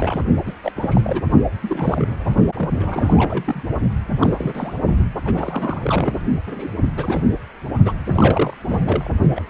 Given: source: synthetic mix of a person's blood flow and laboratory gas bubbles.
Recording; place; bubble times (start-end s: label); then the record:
Doppler ultrasound of blood flow; precordium
0.00-0.24 s: bubbles
0.45-0.53 s: bubbles
0.63-0.72 s: bubbles
0.76-1.25 s: bubbles
1.61-2.35 s: bubbles
2.58-2.72 s: bubbles
2.79-3.62 s: bubbles
4.20-4.75 s: bubbles
5.25-6.22 s: bubbles
6.47-6.68 s: bubbles
6.97-7.26 s: bubbles
7.85-7.92 s: bubbles
8.05-8.57 s: bubbles
8.65-9.08 s: bubbles
9.36-9.42 s: bubbles
From the record:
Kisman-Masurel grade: 342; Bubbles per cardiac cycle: rolling drumbeat, 9 or more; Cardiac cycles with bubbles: 100%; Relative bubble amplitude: moderate (0.250 to 0.450); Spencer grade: 3 (all of the cardiac periods contain showers or single bubble signals, but not dominating or overriding the cardiac motion signals); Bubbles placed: only in the low amplitude regions of the cardiac cycle